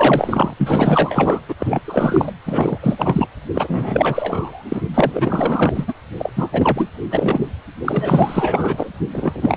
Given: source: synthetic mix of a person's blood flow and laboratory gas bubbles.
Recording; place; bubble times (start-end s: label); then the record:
Doppler ultrasound of blood flow; precordium
0.00-0.53 s: bubbles
0.58-1.41 s: bubbles
1.48-1.54 s: bubbles
1.58-1.81 s: bubbles
1.84-2.33 s: bubbles
2.45-2.79 s: bubbles
2.81-3.28 s: bubbles
3.54-4.64 s: bubbles
4.69-4.83 s: bubbles
4.94-5.85 s: bubbles
5.87-5.93 s: bubbles
6.19-6.32 s: bubbles
6.35-6.50 s: bubbles
6.53-6.90 s: bubbles
7.11-7.47 s: bubbles
7.85-8.89 s: bubbles
9.13-9.57 s: bubbles
From the record:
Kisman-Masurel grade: 444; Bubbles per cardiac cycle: continuous sound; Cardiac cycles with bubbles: 100%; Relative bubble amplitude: maximal (0.775 to 0.999); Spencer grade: 4 (maximum detectable bubble signal sounding continuously throughout systole and diastole of every cardiac period, and overriding the amplitude of the normal cardiac signals); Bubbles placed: anywhere in the cardiac cycle